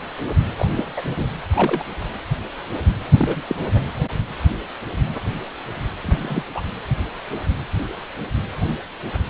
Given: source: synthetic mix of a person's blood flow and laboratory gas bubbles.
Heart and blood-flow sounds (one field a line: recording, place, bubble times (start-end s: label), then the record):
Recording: Doppler ultrasound of blood flow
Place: precordium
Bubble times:
0.56-0.67 s: bubbles
0.77-0.86 s: bubbles
0.96-1.30 s: bubbles
1.50-1.83 s: bubbles
3.17-3.42 s: bubbles
3.48-3.56 s: bubbles
3.74-3.81 s: bubbles
6.02-6.46 s: bubbles
6.54-6.62 s: bubbles
From the record:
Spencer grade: 2 (many but less than half of the cardiac periods contain bubble signals, singularly or in groups)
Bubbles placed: anywhere in the cardiac cycle